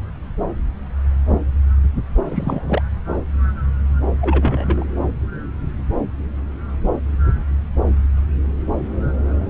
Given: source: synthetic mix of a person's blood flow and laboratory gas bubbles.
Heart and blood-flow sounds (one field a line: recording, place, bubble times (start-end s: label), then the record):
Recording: Doppler ultrasound of blood flow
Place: subclavian vein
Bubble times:
2.31-2.82 s: bubbles
4.21-4.85 s: bubbles
From the record:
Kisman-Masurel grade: 212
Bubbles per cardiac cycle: several, 3 to 8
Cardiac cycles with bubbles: 1 to 10%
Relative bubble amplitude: moderate (0.250 to 0.450)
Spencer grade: 1 (occasional bubble signal discernible with the cardiac motion signal, with majority of cardiac periods free of bubbles)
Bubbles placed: anywhere in the cardiac cycle